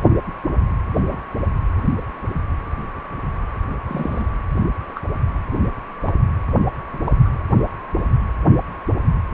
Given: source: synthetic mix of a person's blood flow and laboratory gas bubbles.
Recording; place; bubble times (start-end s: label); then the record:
Doppler ultrasound of blood flow; precordium
0.95-1.01 s: bubbles
1.08-1.21 s: bubbles
3.88-4.25 s: bubbles
4.95-5.00 s: bubbles
6.05-6.11 s: bubbles
7.05-7.13 s: bubbles
7.25-7.29 s: bubbles
From the record:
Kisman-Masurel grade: 122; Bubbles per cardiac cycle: 1 to 2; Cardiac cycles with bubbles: 10 to 50%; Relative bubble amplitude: moderate (0.250 to 0.450); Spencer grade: 2 (many but less than half of the cardiac periods contain bubble signals, singularly or in groups); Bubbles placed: anywhere in the cardiac cycle